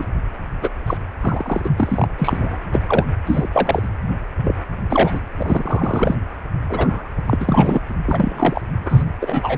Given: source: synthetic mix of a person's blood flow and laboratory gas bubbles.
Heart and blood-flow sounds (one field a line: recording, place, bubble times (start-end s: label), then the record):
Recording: Doppler ultrasound of blood flow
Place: precordium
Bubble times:
0.00-0.07 s: bubbles
0.60-0.69 s: bubbles
0.86-0.97 s: bubbles
1.20-1.67 s: bubbles
1.77-2.07 s: bubbles
2.18-2.58 s: bubbles
2.74-2.79 s: bubbles
2.88-3.05 s: bubbles
3.27-3.50 s: bubbles
3.52-3.88 s: bubbles
4.43-4.55 s: bubbles
4.89-5.20 s: bubbles
5.38-6.16 s: bubbles
6.69-7.09 s: bubbles
7.26-7.36 s: bubbles
7.39-7.80 s: bubbles
8.05-8.61 s: bubbles
8.85-9.04 s: bubbles
9.20-9.58 s: bubbles
From the record:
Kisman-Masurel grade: 243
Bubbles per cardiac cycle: several, 3 to 8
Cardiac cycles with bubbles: 100%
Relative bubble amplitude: loud (0.450 to 0.775)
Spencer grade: 3 (all of the cardiac periods contain showers or single bubble signals, but not dominating or overriding the cardiac motion signals)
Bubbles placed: anywhere in the cardiac cycle